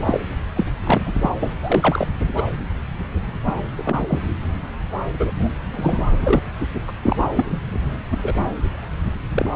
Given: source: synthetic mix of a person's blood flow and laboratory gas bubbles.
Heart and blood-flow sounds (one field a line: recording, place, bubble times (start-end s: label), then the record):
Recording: Doppler ultrasound of blood flow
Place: subclavian vein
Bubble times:
0.05-0.20 s: bubbles
0.56-0.65 s: bubbles
0.83-1.01 s: bubbles
1.05-1.28 s: bubbles
1.40-1.52 s: bubbles
1.62-2.08 s: bubbles
2.36-2.43 s: bubbles
3.43-3.54 s: bubbles
3.77-4.19 s: bubbles
5.19-5.31 s: bubbles
5.38-5.48 s: bubbles
5.71-6.04 s: bubbles
6.23-6.39 s: bubbles
6.88-6.92 s: bubbles
7.02-7.27 s: bubbles
7.35-7.46 s: bubbles
7.50-7.59 s: bubbles
7.71-7.97 s: bubbles
8.11-8.16 s: bubbles
8.22-8.52 s: bubbles
9.32-9.50 s: bubbles
From the record:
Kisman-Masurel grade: 242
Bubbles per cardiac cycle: several, 3 to 8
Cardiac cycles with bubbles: 100%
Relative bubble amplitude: moderate (0.250 to 0.450)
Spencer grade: 3 (all of the cardiac periods contain showers or single bubble signals, but not dominating or overriding the cardiac motion signals)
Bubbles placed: anywhere in the cardiac cycle